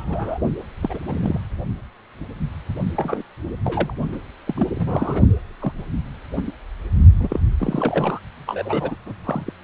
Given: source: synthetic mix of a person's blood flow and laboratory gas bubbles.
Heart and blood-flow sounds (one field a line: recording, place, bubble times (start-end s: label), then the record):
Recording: Doppler ultrasound of blood flow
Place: precordium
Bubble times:
0.00-0.39 s: bubbles
0.82-0.99 s: bubbles
1.07-1.40 s: bubbles
2.96-3.23 s: bubbles
3.64-3.94 s: bubbles
4.12-4.17 s: bubbles
4.47-4.54 s: bubbles
4.57-4.68 s: bubbles
4.75-5.22 s: bubbles
5.61-5.73 s: bubbles
6.36-6.43 s: bubbles
6.47-6.52 s: bubbles
7.20-7.41 s: bubbles
7.58-8.20 s: bubbles
8.46-8.95 s: bubbles
9.05-9.13 s: bubbles
9.23-9.53 s: bubbles
From the record:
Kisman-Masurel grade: 232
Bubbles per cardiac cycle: several, 3 to 8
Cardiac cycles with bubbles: 50 to 99%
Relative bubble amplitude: moderate (0.250 to 0.450)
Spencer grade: 3 (all of the cardiac periods contain showers or single bubble signals, but not dominating or overriding the cardiac motion signals)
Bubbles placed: only in the low amplitude regions of the cardiac cycle